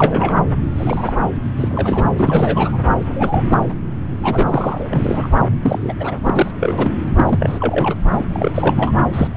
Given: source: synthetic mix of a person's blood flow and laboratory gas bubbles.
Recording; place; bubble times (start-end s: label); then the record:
Doppler ultrasound of blood flow; subclavian vein
0.00-0.32 s: bubbles
0.76-1.14 s: bubbles
1.57-2.04 s: bubbles
2.16-2.79 s: bubbles
2.88-2.95 s: bubbles
3.00-3.73 s: bubbles
4.23-5.27 s: bubbles
5.41-5.44 s: bubbles
5.63-5.93 s: bubbles
6.00-6.15 s: bubbles
6.26-6.51 s: bubbles
6.60-6.95 s: bubbles
7.17-7.96 s: bubbles
8.11-8.25 s: bubbles
8.31-8.51 s: bubbles
8.54-8.92 s: bubbles
9.12-9.28 s: bubbles
9.34-9.37 s: bubbles
From the record:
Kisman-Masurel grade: 342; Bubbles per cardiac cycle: rolling drumbeat, 9 or more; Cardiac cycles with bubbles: 100%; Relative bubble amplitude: moderate (0.250 to 0.450); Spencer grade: 3 (all of the cardiac periods contain showers or single bubble signals, but not dominating or overriding the cardiac motion signals); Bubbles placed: anywhere in the cardiac cycle